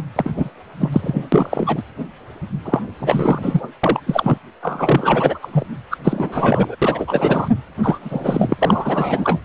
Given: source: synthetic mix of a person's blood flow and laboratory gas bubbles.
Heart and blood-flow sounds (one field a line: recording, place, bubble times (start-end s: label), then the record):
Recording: Doppler ultrasound of blood flow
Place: precordium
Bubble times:
0.16-0.31 s: bubbles
0.36-0.49 s: bubbles
0.80-0.90 s: bubbles
0.92-1.27 s: bubbles
1.32-1.83 s: bubbles
2.65-2.81 s: bubbles
2.99-3.69 s: bubbles
3.83-4.00 s: bubbles
4.06-4.38 s: bubbles
4.62-5.39 s: bubbles
5.42-5.66 s: bubbles
5.90-5.97 s: bubbles
6.04-6.75 s: bubbles
6.82-7.47 s: bubbles
7.82-9.38 s: bubbles
From the record:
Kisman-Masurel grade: 343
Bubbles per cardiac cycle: rolling drumbeat, 9 or more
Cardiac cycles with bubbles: 100%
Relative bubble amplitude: loud (0.450 to 0.775)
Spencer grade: 3 (all of the cardiac periods contain showers or single bubble signals, but not dominating or overriding the cardiac motion signals)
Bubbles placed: anywhere in the cardiac cycle